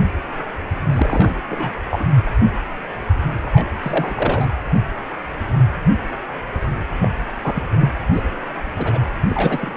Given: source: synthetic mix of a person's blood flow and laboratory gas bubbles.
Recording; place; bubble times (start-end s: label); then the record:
Doppler ultrasound of blood flow; precordium
0.93-1.41 s: bubbles
1.49-1.81 s: bubbles
1.90-2.04 s: bubbles
3.42-3.73 s: bubbles
3.82-4.47 s: bubbles
7.02-7.11 s: bubbles
7.44-7.63 s: bubbles
7.79-7.90 s: bubbles
8.12-8.22 s: bubbles
8.76-9.00 s: bubbles
9.26-9.75 s: bubbles
From the record:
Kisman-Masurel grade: 232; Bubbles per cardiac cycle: several, 3 to 8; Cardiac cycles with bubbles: 50 to 99%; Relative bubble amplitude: moderate (0.250 to 0.450); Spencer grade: 3 (all of the cardiac periods contain showers or single bubble signals, but not dominating or overriding the cardiac motion signals); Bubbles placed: anywhere in the cardiac cycle